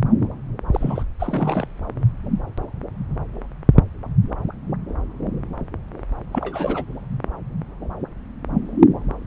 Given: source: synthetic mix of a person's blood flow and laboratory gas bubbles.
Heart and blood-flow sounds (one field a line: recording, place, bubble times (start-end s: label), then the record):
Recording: Doppler ultrasound of blood flow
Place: subclavian vein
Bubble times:
0.72-1.03 s: bubbles
1.19-1.67 s: bubbles
6.33-6.85 s: bubbles
From the record:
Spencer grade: 2 (many but less than half of the cardiac periods contain bubble signals, singularly or in groups)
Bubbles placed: anywhere in the cardiac cycle